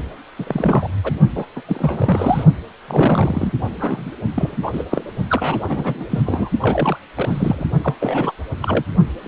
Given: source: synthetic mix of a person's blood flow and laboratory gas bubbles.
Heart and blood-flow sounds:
Doppler ultrasound of blood flow; precordium
0.38-0.89 s: bubbles
1.03-1.14 s: bubbles
1.35-1.45 s: bubbles
1.55-1.61 s: bubbles
1.68-2.44 s: bubbles
2.88-3.53 s: bubbles
3.80-4.10 s: bubbles
4.34-4.57 s: bubbles
4.62-4.84 s: bubbles
4.90-5.04 s: bubbles
5.27-5.60 s: bubbles
5.68-6.04 s: bubbles
6.10-6.50 s: bubbles
6.60-6.97 s: bubbles
7.15-7.67 s: bubbles
7.81-7.95 s: bubbles
7.99-8.31 s: bubbles
8.62-8.84 s: bubbles
9.17-9.28 s: bubbles
From the record:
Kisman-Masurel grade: 342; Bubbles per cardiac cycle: rolling drumbeat, 9 or more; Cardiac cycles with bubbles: 100%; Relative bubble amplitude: moderate (0.250 to 0.450); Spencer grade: 3 (all of the cardiac periods contain showers or single bubble signals, but not dominating or overriding the cardiac motion signals); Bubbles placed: only in the low amplitude regions of the cardiac cycle

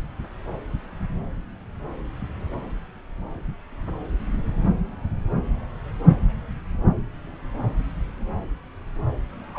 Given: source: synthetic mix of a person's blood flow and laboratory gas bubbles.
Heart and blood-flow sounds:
Doppler ultrasound of blood flow; subclavian vein
9.54-9.59 s: bubbles
From the record:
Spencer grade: 1 (occasional bubble signal discernible with the cardiac motion signal, with majority of cardiac periods free of bubbles); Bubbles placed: anywhere in the cardiac cycle

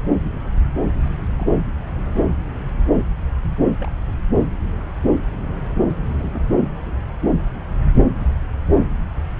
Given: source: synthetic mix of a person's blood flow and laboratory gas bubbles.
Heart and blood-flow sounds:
Doppler ultrasound of blood flow; subclavian vein
1.05-1.09 s: bubbles
1.36-1.57 s: bubbles
3.79-3.88 s: bubbles
6.18-6.40 s: bubbles
From the record:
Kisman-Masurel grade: 121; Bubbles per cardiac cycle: 1 to 2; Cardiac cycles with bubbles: 10 to 50%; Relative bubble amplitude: barely perceptible (0.100 to 0.250); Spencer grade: 2 (many but less than half of the cardiac periods contain bubble signals, singularly or in groups); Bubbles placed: anywhere in the cardiac cycle

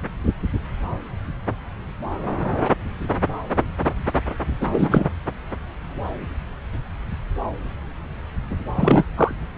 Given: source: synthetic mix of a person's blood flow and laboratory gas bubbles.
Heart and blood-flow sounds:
Doppler ultrasound of blood flow; subclavian vein
4.61-5.10 s: bubbles
8.75-9.04 s: bubbles
9.16-9.34 s: bubbles
From the record:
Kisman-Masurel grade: 223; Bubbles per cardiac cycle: several, 3 to 8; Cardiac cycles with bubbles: 10 to 50%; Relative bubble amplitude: loud (0.450 to 0.775); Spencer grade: 2 (many but less than half of the cardiac periods contain bubble signals, singularly or in groups); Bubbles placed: anywhere in the cardiac cycle

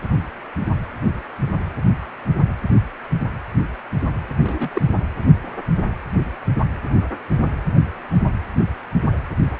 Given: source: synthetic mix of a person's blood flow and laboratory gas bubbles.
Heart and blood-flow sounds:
Doppler ultrasound of blood flow; precordium
4.39-4.69 s: bubbles
4.72-4.82 s: bubbles
From the record:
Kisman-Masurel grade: 112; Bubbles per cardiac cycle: 1 to 2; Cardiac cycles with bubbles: 1 to 10%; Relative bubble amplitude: moderate (0.250 to 0.450); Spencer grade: 1 (occasional bubble signal discernible with the cardiac motion signal, with majority of cardiac periods free of bubbles); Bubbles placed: anywhere in the cardiac cycle

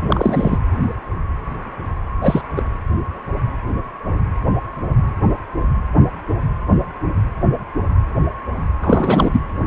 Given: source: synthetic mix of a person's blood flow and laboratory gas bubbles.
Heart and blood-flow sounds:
Doppler ultrasound of blood flow; precordium
0.01-0.57 s: bubbles
2.21-2.42 s: bubbles
2.55-2.63 s: bubbles
8.81-9.41 s: bubbles
From the record:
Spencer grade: 2 (many but less than half of the cardiac periods contain bubble signals, singularly or in groups); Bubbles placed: anywhere in the cardiac cycle

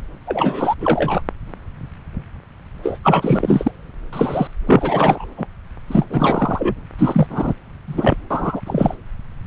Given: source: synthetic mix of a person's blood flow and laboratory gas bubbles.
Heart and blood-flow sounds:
Doppler ultrasound of blood flow; subclavian vein
0.26-0.74 s: bubbles
0.80-1.21 s: bubbles
2.83-2.99 s: bubbles
3.03-3.71 s: bubbles
4.12-4.47 s: bubbles
4.66-5.28 s: bubbles
5.37-5.46 s: bubbles
5.88-6.05 s: bubbles
6.09-6.75 s: bubbles
6.98-7.26 s: bubbles
7.29-7.54 s: bubbles
7.87-8.16 s: bubbles
8.30-8.62 s: bubbles
8.66-8.95 s: bubbles
From the record:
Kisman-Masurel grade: 333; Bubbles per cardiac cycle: rolling drumbeat, 9 or more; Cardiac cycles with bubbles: 50 to 99%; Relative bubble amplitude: loud (0.450 to 0.775); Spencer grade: 3 (all of the cardiac periods contain showers or single bubble signals, but not dominating or overriding the cardiac motion signals); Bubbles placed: anywhere in the cardiac cycle

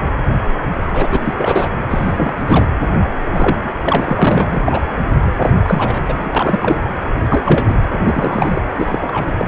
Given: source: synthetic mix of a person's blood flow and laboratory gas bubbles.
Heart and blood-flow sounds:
Doppler ultrasound of blood flow; precordium
0.92-1.21 s: bubbles
1.24-1.70 s: bubbles
1.90-2.34 s: bubbles
2.40-2.67 s: bubbles
3.33-3.60 s: bubbles
3.64-3.74 s: bubbles
3.82-4.13 s: bubbles
4.16-4.92 s: bubbles
5.38-5.50 s: bubbles
5.63-6.03 s: bubbles
6.08-6.29 s: bubbles
6.34-6.83 s: bubbles
7.29-7.80 s: bubbles
7.92-8.61 s: bubbles
8.78-8.98 s: bubbles
9.01-9.32 s: bubbles
9.38-9.46 s: bubbles
From the record:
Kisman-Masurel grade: 333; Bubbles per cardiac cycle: rolling drumbeat, 9 or more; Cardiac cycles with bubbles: 50 to 99%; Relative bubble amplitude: loud (0.450 to 0.775); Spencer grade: 3 (all of the cardiac periods contain showers or single bubble signals, but not dominating or overriding the cardiac motion signals); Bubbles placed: anywhere in the cardiac cycle

